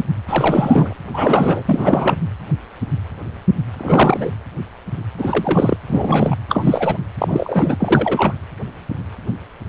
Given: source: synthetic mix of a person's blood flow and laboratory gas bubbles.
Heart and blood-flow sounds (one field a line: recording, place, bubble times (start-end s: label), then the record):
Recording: Doppler ultrasound of blood flow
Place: precordium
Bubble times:
0.28-0.97 s: bubbles
1.14-2.16 s: bubbles
3.77-4.31 s: bubbles
5.18-5.78 s: bubbles
5.88-6.36 s: bubbles
6.49-6.98 s: bubbles
7.18-7.76 s: bubbles
7.80-8.34 s: bubbles
From the record:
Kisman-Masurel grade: 333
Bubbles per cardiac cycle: rolling drumbeat, 9 or more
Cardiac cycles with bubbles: 50 to 99%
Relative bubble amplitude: loud (0.450 to 0.775)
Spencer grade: 3 (all of the cardiac periods contain showers or single bubble signals, but not dominating or overriding the cardiac motion signals)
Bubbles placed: anywhere in the cardiac cycle